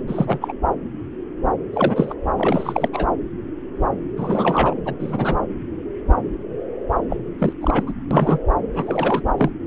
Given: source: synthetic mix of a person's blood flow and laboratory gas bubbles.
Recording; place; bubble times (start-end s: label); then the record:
Doppler ultrasound of blood flow; subclavian vein
0.07-0.53 s: bubbles
1.73-2.14 s: bubbles
2.37-2.89 s: bubbles
2.93-3.06 s: bubbles
4.17-4.74 s: bubbles
4.85-4.93 s: bubbles
5.00-5.36 s: bubbles
7.09-7.17 s: bubbles
7.38-7.52 s: bubbles
7.60-7.83 s: bubbles
7.86-7.92 s: bubbles
8.11-8.40 s: bubbles
8.74-9.22 s: bubbles
9.38-9.51 s: bubbles
From the record:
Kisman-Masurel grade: 232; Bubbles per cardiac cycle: several, 3 to 8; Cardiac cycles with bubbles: 50 to 99%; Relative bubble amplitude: moderate (0.250 to 0.450); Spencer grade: 3 (all of the cardiac periods contain showers or single bubble signals, but not dominating or overriding the cardiac motion signals); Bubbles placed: anywhere in the cardiac cycle